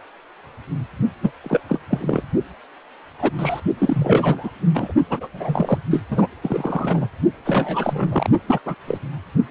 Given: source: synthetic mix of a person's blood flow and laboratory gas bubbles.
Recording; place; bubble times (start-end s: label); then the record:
Doppler ultrasound of blood flow; precordium
1.21-1.31 s: bubbles
1.44-1.60 s: bubbles
1.69-1.79 s: bubbles
1.90-2.23 s: bubbles
3.19-3.30 s: bubbles
3.38-3.60 s: bubbles
3.78-4.50 s: bubbles
4.74-4.93 s: bubbles
5.09-5.28 s: bubbles
5.33-5.78 s: bubbles
5.91-6.01 s: bubbles
6.10-6.27 s: bubbles
6.41-7.07 s: bubbles
7.45-8.29 s: bubbles
8.47-8.60 s: bubbles
8.65-8.75 s: bubbles
8.88-8.98 s: bubbles
From the record:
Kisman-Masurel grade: 232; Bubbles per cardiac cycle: several, 3 to 8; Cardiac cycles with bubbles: 50 to 99%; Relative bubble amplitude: moderate (0.250 to 0.450); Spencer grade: 3 (all of the cardiac periods contain showers or single bubble signals, but not dominating or overriding the cardiac motion signals); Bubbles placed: only in the low amplitude regions of the cardiac cycle